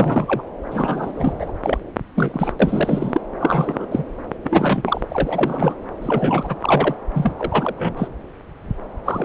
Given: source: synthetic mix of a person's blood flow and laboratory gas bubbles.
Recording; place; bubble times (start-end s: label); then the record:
Doppler ultrasound of blood flow; subclavian vein
0.00-0.42 s: bubbles
0.70-1.52 s: bubbles
1.63-1.77 s: bubbles
2.15-2.52 s: bubbles
2.59-3.21 s: bubbles
3.40-3.85 s: bubbles
3.91-4.03 s: bubbles
4.44-5.05 s: bubbles
5.11-5.75 s: bubbles
6.02-6.55 s: bubbles
6.60-6.95 s: bubbles
7.13-7.33 s: bubbles
7.39-7.74 s: bubbles
7.78-8.14 s: bubbles
9.05-9.25 s: bubbles
From the record:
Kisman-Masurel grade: 332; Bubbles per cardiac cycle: rolling drumbeat, 9 or more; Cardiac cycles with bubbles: 50 to 99%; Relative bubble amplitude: moderate (0.250 to 0.450); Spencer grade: 3 (all of the cardiac periods contain showers or single bubble signals, but not dominating or overriding the cardiac motion signals); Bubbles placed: anywhere in the cardiac cycle